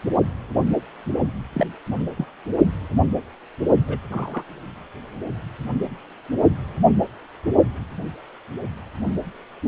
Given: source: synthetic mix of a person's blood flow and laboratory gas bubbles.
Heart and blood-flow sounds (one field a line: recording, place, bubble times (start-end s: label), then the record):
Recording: Doppler ultrasound of blood flow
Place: precordium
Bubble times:
1.53-1.67 s: bubbles
2.17-2.25 s: bubbles
3.88-3.97 s: bubbles
4.11-4.45 s: bubbles
From the record:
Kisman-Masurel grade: 122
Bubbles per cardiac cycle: 1 to 2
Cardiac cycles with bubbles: 10 to 50%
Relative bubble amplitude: moderate (0.250 to 0.450)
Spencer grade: 2 (many but less than half of the cardiac periods contain bubble signals, singularly or in groups)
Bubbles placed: only in the low amplitude regions of the cardiac cycle